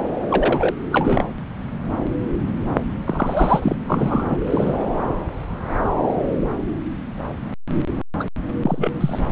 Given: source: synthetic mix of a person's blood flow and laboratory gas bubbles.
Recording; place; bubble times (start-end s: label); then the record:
Doppler ultrasound of blood flow; subclavian vein
0.30-0.75 s: bubbles
0.92-1.24 s: bubbles
3.04-3.76 s: bubbles
3.87-4.37 s: bubbles
4.46-4.84 s: bubbles
8.20-8.24 s: bubbles
8.62-8.91 s: bubbles
9.00-9.21 s: bubbles
From the record:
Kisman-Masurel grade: 222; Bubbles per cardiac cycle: several, 3 to 8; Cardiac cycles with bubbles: 10 to 50%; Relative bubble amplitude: moderate (0.250 to 0.450); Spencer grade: 2 (many but less than half of the cardiac periods contain bubble signals, singularly or in groups); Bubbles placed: anywhere in the cardiac cycle